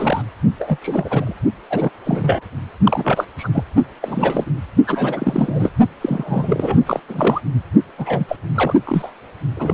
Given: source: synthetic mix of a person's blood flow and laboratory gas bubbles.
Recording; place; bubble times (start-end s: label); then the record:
Doppler ultrasound of blood flow; precordium
0.00-0.23 s: bubbles
0.59-0.77 s: bubbles
0.82-1.34 s: bubbles
1.69-1.90 s: bubbles
2.05-2.43 s: bubbles
2.83-3.26 s: bubbles
3.38-3.49 s: bubbles
3.53-3.64 s: bubbles
4.01-4.44 s: bubbles
4.86-5.71 s: bubbles
6.01-7.00 s: bubbles
7.08-7.40 s: bubbles
7.98-8.25 s: bubbles
8.28-8.36 s: bubbles
8.55-8.75 s: bubbles
8.84-9.11 s: bubbles
9.56-9.74 s: bubbles
From the record:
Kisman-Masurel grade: 332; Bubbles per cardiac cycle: rolling drumbeat, 9 or more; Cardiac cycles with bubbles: 50 to 99%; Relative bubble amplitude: moderate (0.250 to 0.450); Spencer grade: 3 (all of the cardiac periods contain showers or single bubble signals, but not dominating or overriding the cardiac motion signals); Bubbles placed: only in the low amplitude regions of the cardiac cycle